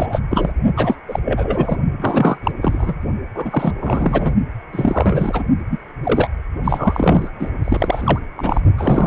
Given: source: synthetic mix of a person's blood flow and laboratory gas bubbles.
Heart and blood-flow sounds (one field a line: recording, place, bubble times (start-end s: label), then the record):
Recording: Doppler ultrasound of blood flow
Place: precordium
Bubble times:
0.00-0.21 s: bubbles
0.31-0.51 s: bubbles
0.76-0.96 s: bubbles
1.08-1.20 s: bubbles
1.24-1.77 s: bubbles
1.99-2.37 s: bubbles
2.43-2.51 s: bubbles
2.61-2.96 s: bubbles
3.35-3.73 s: bubbles
3.82-4.35 s: bubbles
4.72-5.43 s: bubbles
5.70-5.79 s: bubbles
6.04-6.30 s: bubbles
6.64-7.31 s: bubbles
7.40-7.49 s: bubbles
7.63-8.20 s: bubbles
8.36-8.61 s: bubbles
8.77-9.07 s: bubbles
From the record:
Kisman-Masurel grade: 343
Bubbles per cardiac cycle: rolling drumbeat, 9 or more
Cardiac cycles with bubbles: 100%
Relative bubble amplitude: loud (0.450 to 0.775)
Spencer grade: 3 (all of the cardiac periods contain showers or single bubble signals, but not dominating or overriding the cardiac motion signals)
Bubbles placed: only in the low amplitude regions of the cardiac cycle